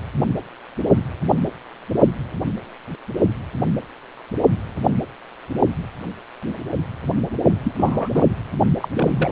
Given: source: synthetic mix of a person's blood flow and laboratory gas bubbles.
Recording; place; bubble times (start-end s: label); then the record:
Doppler ultrasound of blood flow; precordium
7.63-7.72 s: bubbles
7.77-8.09 s: bubbles
8.13-8.25 s: bubbles
8.77-8.88 s: bubbles
8.96-9.32 s: bubbles
From the record:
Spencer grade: 2 (many but less than half of the cardiac periods contain bubble signals, singularly or in groups); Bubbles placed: only in the low amplitude regions of the cardiac cycle